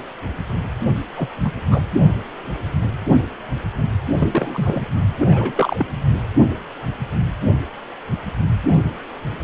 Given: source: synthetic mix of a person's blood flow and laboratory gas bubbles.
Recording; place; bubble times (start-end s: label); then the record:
Doppler ultrasound of blood flow; precordium
1.18-1.28 s: bubbles
1.43-1.53 s: bubbles
1.70-1.82 s: bubbles
4.17-4.87 s: bubbles
5.19-5.54 s: bubbles
5.57-5.86 s: bubbles
From the record:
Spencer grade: 3 (all of the cardiac periods contain showers or single bubble signals, but not dominating or overriding the cardiac motion signals); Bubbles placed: only in the low amplitude regions of the cardiac cycle